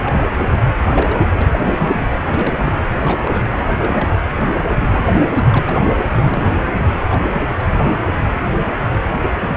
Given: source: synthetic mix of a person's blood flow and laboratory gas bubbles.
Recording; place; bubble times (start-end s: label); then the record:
Doppler ultrasound of blood flow; precordium
0.04-0.28 s: bubbles
0.37-0.50 s: bubbles
0.90-1.47 s: bubbles
1.51-2.07 s: bubbles
2.19-2.73 s: bubbles
2.94-3.46 s: bubbles
3.78-4.12 s: bubbles
4.22-4.27 s: bubbles
4.53-5.29 s: bubbles
5.37-5.92 s: bubbles
6.10-6.63 s: bubbles
7.08-7.50 s: bubbles
7.59-7.62 s: bubbles
7.71-8.01 s: bubbles
From the record:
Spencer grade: 3 (all of the cardiac periods contain showers or single bubble signals, but not dominating or overriding the cardiac motion signals); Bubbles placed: anywhere in the cardiac cycle